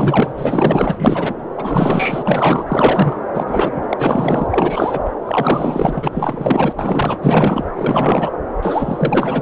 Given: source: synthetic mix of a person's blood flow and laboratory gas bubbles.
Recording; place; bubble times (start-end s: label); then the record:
Doppler ultrasound of blood flow; subclavian vein
0.00-0.32 s: bubbles
0.38-0.96 s: bubbles
0.98-1.34 s: bubbles
1.56-3.17 s: bubbles
3.34-3.87 s: bubbles
3.89-4.47 s: bubbles
4.50-5.00 s: bubbles
5.25-6.09 s: bubbles
6.12-6.73 s: bubbles
6.79-7.65 s: bubbles
7.75-8.31 s: bubbles
8.62-9.42 s: bubbles
From the record:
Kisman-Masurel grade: 444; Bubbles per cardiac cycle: continuous sound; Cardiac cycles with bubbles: 100%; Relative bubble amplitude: maximal (0.775 to 0.999); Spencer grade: 4 (maximum detectable bubble signal sounding continuously throughout systole and diastole of every cardiac period, and overriding the amplitude of the normal cardiac signals); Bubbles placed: anywhere in the cardiac cycle